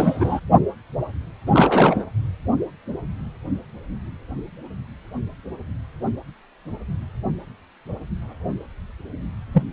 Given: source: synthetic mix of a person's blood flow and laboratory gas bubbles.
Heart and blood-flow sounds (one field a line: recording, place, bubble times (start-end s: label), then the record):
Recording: Doppler ultrasound of blood flow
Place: precordium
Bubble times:
0.00-0.40 s: bubbles
1.47-2.04 s: bubbles
9.52-9.63 s: bubbles
From the record:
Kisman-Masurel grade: 223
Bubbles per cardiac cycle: several, 3 to 8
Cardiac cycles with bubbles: 10 to 50%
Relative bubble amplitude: loud (0.450 to 0.775)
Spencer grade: 2 (many but less than half of the cardiac periods contain bubble signals, singularly or in groups)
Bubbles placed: anywhere in the cardiac cycle